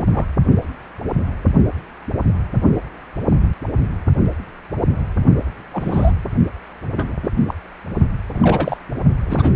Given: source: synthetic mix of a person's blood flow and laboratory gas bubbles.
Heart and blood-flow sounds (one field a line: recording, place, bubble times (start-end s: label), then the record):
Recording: Doppler ultrasound of blood flow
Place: precordium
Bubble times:
0.00-0.26 s: bubbles
5.73-6.12 s: bubbles
6.96-7.17 s: bubbles
7.22-7.29 s: bubbles
7.48-7.54 s: bubbles
8.33-8.77 s: bubbles
9.25-9.51 s: bubbles
From the record:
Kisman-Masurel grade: 222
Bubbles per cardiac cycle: several, 3 to 8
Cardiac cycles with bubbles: 10 to 50%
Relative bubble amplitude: moderate (0.250 to 0.450)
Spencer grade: 2 (many but less than half of the cardiac periods contain bubble signals, singularly or in groups)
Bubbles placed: only in the low amplitude regions of the cardiac cycle